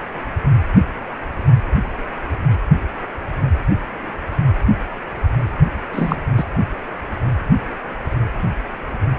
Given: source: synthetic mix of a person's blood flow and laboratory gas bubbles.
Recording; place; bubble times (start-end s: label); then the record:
Doppler ultrasound of blood flow; precordium
5.92-6.17 s: bubbles
6.37-6.44 s: bubbles
From the record:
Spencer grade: 1 (occasional bubble signal discernible with the cardiac motion signal, with majority of cardiac periods free of bubbles); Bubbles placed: anywhere in the cardiac cycle